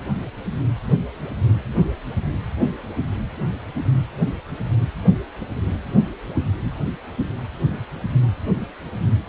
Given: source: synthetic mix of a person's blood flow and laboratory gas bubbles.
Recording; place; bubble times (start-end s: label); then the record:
Doppler ultrasound of blood flow; precordium
no bubbles
From the record:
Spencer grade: 0 (complete lack of bubble signals)